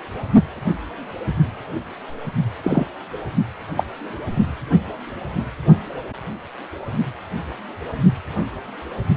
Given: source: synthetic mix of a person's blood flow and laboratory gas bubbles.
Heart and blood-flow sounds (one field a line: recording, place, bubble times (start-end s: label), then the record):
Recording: Doppler ultrasound of blood flow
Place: precordium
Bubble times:
2.63-2.85 s: bubbles
3.76-3.83 s: bubbles
From the record:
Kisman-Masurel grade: 123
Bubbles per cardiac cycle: 1 to 2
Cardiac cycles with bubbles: 10 to 50%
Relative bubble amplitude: loud (0.450 to 0.775)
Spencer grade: 2 (many but less than half of the cardiac periods contain bubble signals, singularly or in groups)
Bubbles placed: only in the low amplitude regions of the cardiac cycle